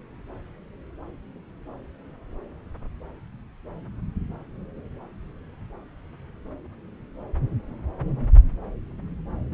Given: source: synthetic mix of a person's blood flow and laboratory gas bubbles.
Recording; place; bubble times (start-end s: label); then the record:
Doppler ultrasound of blood flow; subclavian vein
no bubbles
From the record:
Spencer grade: 0 (complete lack of bubble signals)